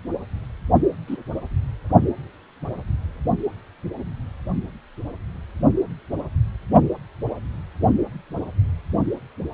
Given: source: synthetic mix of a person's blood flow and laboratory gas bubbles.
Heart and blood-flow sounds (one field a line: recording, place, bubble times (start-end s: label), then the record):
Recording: Doppler ultrasound of blood flow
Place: precordium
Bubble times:
1.07-1.17 s: bubbles
From the record:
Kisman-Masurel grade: 112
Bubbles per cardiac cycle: 1 to 2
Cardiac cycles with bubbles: 1 to 10%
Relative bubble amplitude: moderate (0.250 to 0.450)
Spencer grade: 1 (occasional bubble signal discernible with the cardiac motion signal, with majority of cardiac periods free of bubbles)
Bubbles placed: only in the low amplitude regions of the cardiac cycle